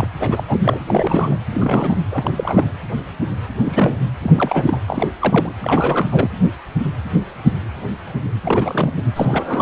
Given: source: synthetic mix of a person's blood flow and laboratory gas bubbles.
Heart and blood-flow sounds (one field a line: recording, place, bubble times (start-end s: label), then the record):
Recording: Doppler ultrasound of blood flow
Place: precordium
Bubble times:
0.00-0.07 s: bubbles
0.20-0.43 s: bubbles
0.47-0.57 s: bubbles
0.63-0.80 s: bubbles
0.87-1.39 s: bubbles
1.51-1.98 s: bubbles
2.12-2.72 s: bubbles
3.60-3.99 s: bubbles
4.04-4.11 s: bubbles
4.23-4.79 s: bubbles
4.87-5.11 s: bubbles
5.20-5.52 s: bubbles
5.62-6.28 s: bubbles
8.44-8.92 s: bubbles
8.97-9.02 s: bubbles
9.16-9.62 s: bubbles
From the record:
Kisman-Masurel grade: 332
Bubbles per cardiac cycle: rolling drumbeat, 9 or more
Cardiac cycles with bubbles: 50 to 99%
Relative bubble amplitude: moderate (0.250 to 0.450)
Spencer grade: 3 (all of the cardiac periods contain showers or single bubble signals, but not dominating or overriding the cardiac motion signals)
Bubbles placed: anywhere in the cardiac cycle